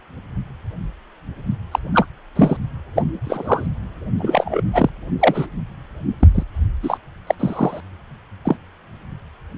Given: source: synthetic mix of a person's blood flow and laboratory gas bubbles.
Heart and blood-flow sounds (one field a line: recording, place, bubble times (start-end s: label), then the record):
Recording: Doppler ultrasound of blood flow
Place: precordium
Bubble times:
1.71-1.79 s: bubbles
1.93-2.06 s: bubbles
2.35-2.57 s: bubbles
2.95-3.02 s: bubbles
3.24-3.67 s: bubbles
4.17-4.62 s: bubbles
4.73-4.90 s: bubbles
5.20-5.46 s: bubbles
6.20-6.28 s: bubbles
6.34-6.43 s: bubbles
6.83-6.98 s: bubbles
7.27-7.34 s: bubbles
7.40-7.80 s: bubbles
8.45-8.56 s: bubbles
From the record:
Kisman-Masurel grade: 223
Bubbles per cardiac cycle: several, 3 to 8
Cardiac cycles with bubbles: 10 to 50%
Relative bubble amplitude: loud (0.450 to 0.775)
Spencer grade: 2 (many but less than half of the cardiac periods contain bubble signals, singularly or in groups)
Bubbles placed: anywhere in the cardiac cycle